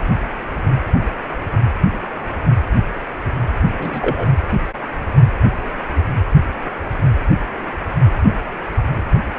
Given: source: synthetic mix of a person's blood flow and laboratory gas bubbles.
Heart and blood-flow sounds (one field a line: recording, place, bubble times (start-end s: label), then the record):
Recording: Doppler ultrasound of blood flow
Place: precordium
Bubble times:
3.77-4.28 s: bubbles
From the record:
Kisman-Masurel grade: 113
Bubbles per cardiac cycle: 1 to 2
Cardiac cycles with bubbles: 1 to 10%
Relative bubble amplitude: loud (0.450 to 0.775)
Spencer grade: 1 (occasional bubble signal discernible with the cardiac motion signal, with majority of cardiac periods free of bubbles)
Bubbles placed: anywhere in the cardiac cycle